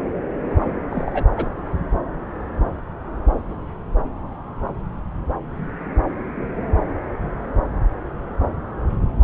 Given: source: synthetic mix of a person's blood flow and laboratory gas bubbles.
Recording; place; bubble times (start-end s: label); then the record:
Doppler ultrasound of blood flow; subclavian vein
0.90-1.23 s: bubbles
1.36-1.47 s: bubbles
From the record:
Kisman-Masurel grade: 122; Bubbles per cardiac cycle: 1 to 2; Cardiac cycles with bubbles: 10 to 50%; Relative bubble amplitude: moderate (0.250 to 0.450); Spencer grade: 2 (many but less than half of the cardiac periods contain bubble signals, singularly or in groups); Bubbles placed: anywhere in the cardiac cycle